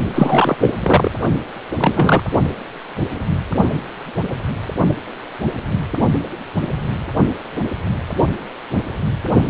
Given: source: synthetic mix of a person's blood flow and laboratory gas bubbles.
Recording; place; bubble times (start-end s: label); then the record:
Doppler ultrasound of blood flow; precordium
0.14-0.55 s: bubbles
0.61-0.71 s: bubbles
0.82-1.11 s: bubbles
1.77-2.24 s: bubbles
From the record:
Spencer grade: 2 (many but less than half of the cardiac periods contain bubble signals, singularly or in groups); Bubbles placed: only in the low amplitude regions of the cardiac cycle